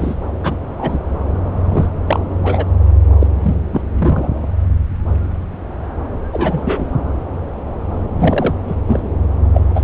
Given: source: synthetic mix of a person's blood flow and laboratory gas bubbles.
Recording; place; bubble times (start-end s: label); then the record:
Doppler ultrasound of blood flow; subclavian vein
0.00-0.15 s: bubbles
0.42-0.56 s: bubbles
0.79-0.98 s: bubbles
1.68-1.86 s: bubbles
2.06-2.19 s: bubbles
2.43-2.65 s: bubbles
3.19-3.27 s: bubbles
3.42-3.56 s: bubbles
3.72-3.82 s: bubbles
3.99-4.29 s: bubbles
6.31-6.97 s: bubbles
8.19-8.54 s: bubbles
8.68-8.76 s: bubbles
8.87-9.10 s: bubbles
9.54-9.63 s: bubbles
9.74-9.84 s: bubbles
From the record:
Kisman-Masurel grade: 232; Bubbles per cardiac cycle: several, 3 to 8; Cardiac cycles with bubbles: 50 to 99%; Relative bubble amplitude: moderate (0.250 to 0.450); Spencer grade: 3 (all of the cardiac periods contain showers or single bubble signals, but not dominating or overriding the cardiac motion signals); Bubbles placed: anywhere in the cardiac cycle